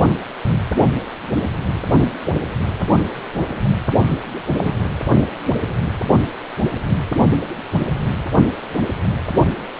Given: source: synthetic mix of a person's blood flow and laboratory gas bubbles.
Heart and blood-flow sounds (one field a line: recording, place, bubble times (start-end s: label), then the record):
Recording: Doppler ultrasound of blood flow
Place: precordium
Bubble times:
4.46-4.83 s: bubbles
From the record:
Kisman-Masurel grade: 122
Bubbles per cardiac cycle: 1 to 2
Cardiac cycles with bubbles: 10 to 50%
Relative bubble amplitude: moderate (0.250 to 0.450)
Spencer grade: 2 (many but less than half of the cardiac periods contain bubble signals, singularly or in groups)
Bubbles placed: anywhere in the cardiac cycle